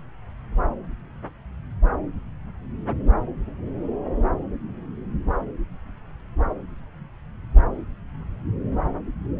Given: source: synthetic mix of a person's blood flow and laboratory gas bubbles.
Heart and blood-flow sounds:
Doppler ultrasound of blood flow; subclavian vein
no bubbles
From the record:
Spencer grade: 0 (complete lack of bubble signals)

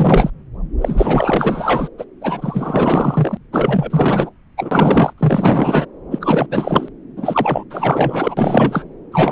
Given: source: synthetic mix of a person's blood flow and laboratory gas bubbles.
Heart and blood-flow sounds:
Doppler ultrasound of blood flow; subclavian vein
0.00-0.30 s: bubbles
0.81-1.88 s: bubbles
1.98-2.04 s: bubbles
2.21-3.37 s: bubbles
3.53-4.29 s: bubbles
4.57-5.13 s: bubbles
5.17-5.85 s: bubbles
6.10-6.47 s: bubbles
6.50-6.88 s: bubbles
7.16-7.63 s: bubbles
7.70-8.85 s: bubbles
9.12-9.32 s: bubbles
From the record:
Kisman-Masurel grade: 444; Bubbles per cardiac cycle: continuous sound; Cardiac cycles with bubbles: 100%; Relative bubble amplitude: maximal (0.775 to 0.999); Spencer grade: 4 (maximum detectable bubble signal sounding continuously throughout systole and diastole of every cardiac period, and overriding the amplitude of the normal cardiac signals); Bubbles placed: anywhere in the cardiac cycle

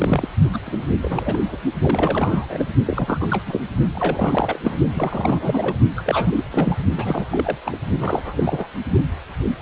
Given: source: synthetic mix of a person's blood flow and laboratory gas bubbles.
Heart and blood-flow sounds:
Doppler ultrasound of blood flow; precordium
0.00-0.28 s: bubbles
0.53-0.59 s: bubbles
0.65-0.84 s: bubbles
1.01-1.40 s: bubbles
1.49-1.57 s: bubbles
1.81-2.65 s: bubbles
2.87-3.60 s: bubbles
3.94-4.58 s: bubbles
4.63-4.75 s: bubbles
4.93-5.76 s: bubbles
5.96-6.45 s: bubbles
6.50-6.76 s: bubbles
6.97-7.58 s: bubbles
7.66-7.80 s: bubbles
7.98-8.69 s: bubbles
From the record:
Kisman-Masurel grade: 332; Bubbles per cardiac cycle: rolling drumbeat, 9 or more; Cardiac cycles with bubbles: 50 to 99%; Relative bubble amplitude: moderate (0.250 to 0.450); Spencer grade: 3 (all of the cardiac periods contain showers or single bubble signals, but not dominating or overriding the cardiac motion signals); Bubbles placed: only in the low amplitude regions of the cardiac cycle

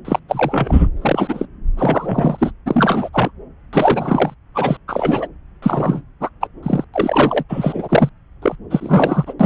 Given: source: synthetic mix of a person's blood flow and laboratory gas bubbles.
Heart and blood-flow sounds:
Doppler ultrasound of blood flow; subclavian vein
0.05-0.19 s: bubbles
0.28-0.87 s: bubbles
0.97-1.47 s: bubbles
1.77-2.51 s: bubbles
2.65-3.09 s: bubbles
3.13-3.30 s: bubbles
3.72-4.34 s: bubbles
4.54-4.77 s: bubbles
4.88-5.27 s: bubbles
5.62-6.01 s: bubbles
6.20-6.29 s: bubbles
6.41-6.48 s: bubbles
6.62-6.84 s: bubbles
6.93-7.43 s: bubbles
7.49-8.10 s: bubbles
8.42-8.55 s: bubbles
8.70-9.33 s: bubbles
9.39-9.46 s: bubbles
From the record:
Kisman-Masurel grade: 343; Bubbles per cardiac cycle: rolling drumbeat, 9 or more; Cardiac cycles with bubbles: 100%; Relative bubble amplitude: loud (0.450 to 0.775); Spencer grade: 3 (all of the cardiac periods contain showers or single bubble signals, but not dominating or overriding the cardiac motion signals); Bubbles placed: anywhere in the cardiac cycle

